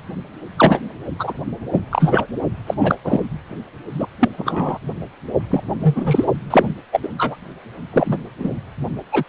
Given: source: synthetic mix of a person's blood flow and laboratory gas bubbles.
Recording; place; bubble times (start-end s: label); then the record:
Doppler ultrasound of blood flow; precordium
0.57-0.79 s: bubbles
1.19-1.33 s: bubbles
1.72-1.84 s: bubbles
1.91-2.25 s: bubbles
2.67-2.74 s: bubbles
2.79-2.96 s: bubbles
3.04-3.23 s: bubbles
3.93-4.07 s: bubbles
4.20-4.29 s: bubbles
4.37-4.78 s: bubbles
5.50-5.64 s: bubbles
5.83-6.25 s: bubbles
6.50-6.74 s: bubbles
6.92-7.00 s: bubbles
7.03-7.09 s: bubbles
7.17-7.36 s: bubbles
7.91-8.17 s: bubbles
8.38-8.53 s: bubbles
9.12-9.23 s: bubbles
From the record:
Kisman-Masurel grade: 243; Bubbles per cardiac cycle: several, 3 to 8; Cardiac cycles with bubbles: 100%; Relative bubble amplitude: loud (0.450 to 0.775); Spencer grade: 3 (all of the cardiac periods contain showers or single bubble signals, but not dominating or overriding the cardiac motion signals); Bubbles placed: only in the low amplitude regions of the cardiac cycle